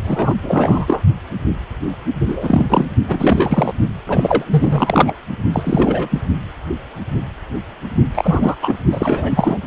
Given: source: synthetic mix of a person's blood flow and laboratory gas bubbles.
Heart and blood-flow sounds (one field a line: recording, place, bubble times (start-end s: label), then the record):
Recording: Doppler ultrasound of blood flow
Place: precordium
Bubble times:
0.04-0.34 s: bubbles
0.42-1.01 s: bubbles
2.27-2.66 s: bubbles
2.69-2.85 s: bubbles
3.08-3.75 s: bubbles
4.06-4.45 s: bubbles
4.50-5.13 s: bubbles
5.53-6.08 s: bubbles
6.11-6.21 s: bubbles
8.14-8.55 s: bubbles
8.61-8.74 s: bubbles
8.91-9.58 s: bubbles
From the record:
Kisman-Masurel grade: 333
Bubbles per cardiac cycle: rolling drumbeat, 9 or more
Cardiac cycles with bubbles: 50 to 99%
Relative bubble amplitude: loud (0.450 to 0.775)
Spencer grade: 3 (all of the cardiac periods contain showers or single bubble signals, but not dominating or overriding the cardiac motion signals)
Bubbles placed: only in the low amplitude regions of the cardiac cycle